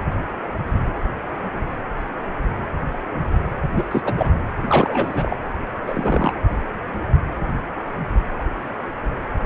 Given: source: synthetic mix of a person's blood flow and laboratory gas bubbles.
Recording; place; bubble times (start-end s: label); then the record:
Doppler ultrasound of blood flow; precordium
3.75-3.85 s: bubbles
3.91-4.02 s: bubbles
4.05-4.15 s: bubbles
4.17-4.30 s: bubbles
4.67-5.38 s: bubbles
5.87-6.32 s: bubbles
From the record:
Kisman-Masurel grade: 222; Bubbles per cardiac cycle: several, 3 to 8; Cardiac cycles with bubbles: 10 to 50%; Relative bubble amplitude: moderate (0.250 to 0.450); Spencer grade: 2 (many but less than half of the cardiac periods contain bubble signals, singularly or in groups); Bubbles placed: anywhere in the cardiac cycle